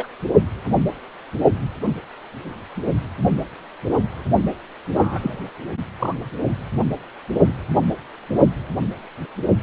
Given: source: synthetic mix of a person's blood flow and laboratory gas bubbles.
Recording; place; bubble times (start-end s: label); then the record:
Doppler ultrasound of blood flow; precordium
0.00-0.07 s: bubbles
4.94-5.50 s: bubbles
6.00-6.15 s: bubbles
From the record:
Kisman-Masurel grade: 122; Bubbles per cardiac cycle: 1 to 2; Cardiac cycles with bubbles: 10 to 50%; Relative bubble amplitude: moderate (0.250 to 0.450); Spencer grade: 2 (many but less than half of the cardiac periods contain bubble signals, singularly or in groups); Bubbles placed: only in the low amplitude regions of the cardiac cycle